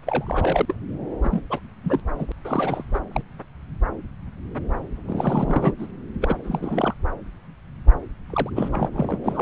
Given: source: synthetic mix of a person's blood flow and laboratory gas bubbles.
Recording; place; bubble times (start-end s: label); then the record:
Doppler ultrasound of blood flow; subclavian vein
0.06-0.75 s: bubbles
1.23-1.44 s: bubbles
1.50-1.59 s: bubbles
1.84-2.00 s: bubbles
2.17-2.25 s: bubbles
2.28-2.32 s: bubbles
2.44-2.85 s: bubbles
2.94-2.99 s: bubbles
3.12-3.23 s: bubbles
5.05-5.72 s: bubbles
5.79-5.87 s: bubbles
6.21-6.36 s: bubbles
6.43-6.94 s: bubbles
8.30-8.50 s: bubbles
8.55-8.69 s: bubbles
8.71-9.20 s: bubbles
9.23-9.42 s: bubbles
From the record:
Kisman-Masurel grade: 332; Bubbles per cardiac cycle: rolling drumbeat, 9 or more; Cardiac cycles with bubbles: 50 to 99%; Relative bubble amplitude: moderate (0.250 to 0.450); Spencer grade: 3 (all of the cardiac periods contain showers or single bubble signals, but not dominating or overriding the cardiac motion signals); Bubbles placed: anywhere in the cardiac cycle